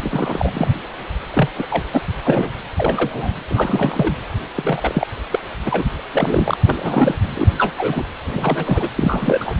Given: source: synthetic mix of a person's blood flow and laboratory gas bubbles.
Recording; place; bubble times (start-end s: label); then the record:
Doppler ultrasound of blood flow; precordium
0.00-0.52 s: bubbles
0.55-0.71 s: bubbles
1.33-1.48 s: bubbles
1.54-1.66 s: bubbles
1.70-1.83 s: bubbles
1.92-2.02 s: bubbles
2.25-2.51 s: bubbles
2.74-3.33 s: bubbles
3.50-4.15 s: bubbles
4.55-5.07 s: bubbles
5.31-5.40 s: bubbles
5.66-5.85 s: bubbles
6.09-6.57 s: bubbles
6.65-7.15 s: bubbles
7.35-7.51 s: bubbles
7.58-7.73 s: bubbles
7.78-8.05 s: bubbles
8.26-8.88 s: bubbles
8.96-9.55 s: bubbles
From the record:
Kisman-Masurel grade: 242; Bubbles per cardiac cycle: several, 3 to 8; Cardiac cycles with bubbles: 100%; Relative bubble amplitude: moderate (0.250 to 0.450); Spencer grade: 3 (all of the cardiac periods contain showers or single bubble signals, but not dominating or overriding the cardiac motion signals); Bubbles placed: anywhere in the cardiac cycle